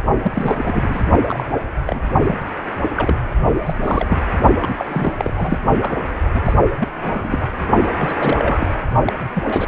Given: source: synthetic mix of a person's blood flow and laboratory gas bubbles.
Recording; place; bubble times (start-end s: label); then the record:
Doppler ultrasound of blood flow; precordium
0.23-1.03 s: bubbles
1.27-1.46 s: bubbles
1.86-2.00 s: bubbles
2.04-2.17 s: bubbles
2.26-2.34 s: bubbles
2.97-3.16 s: bubbles
3.66-3.74 s: bubbles
3.81-4.17 s: bubbles
4.58-5.12 s: bubbles
5.18-5.59 s: bubbles
5.79-5.97 s: bubbles
6.34-6.40 s: bubbles
6.44-6.54 s: bubbles
6.79-6.88 s: bubbles
7.02-7.48 s: bubbles
7.97-8.67 s: bubbles
9.05-9.13 s: bubbles
9.35-9.68 s: bubbles
From the record:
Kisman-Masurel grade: 342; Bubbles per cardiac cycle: rolling drumbeat, 9 or more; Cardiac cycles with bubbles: 100%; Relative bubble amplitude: moderate (0.250 to 0.450); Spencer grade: 3 (all of the cardiac periods contain showers or single bubble signals, but not dominating or overriding the cardiac motion signals); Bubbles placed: only in the low amplitude regions of the cardiac cycle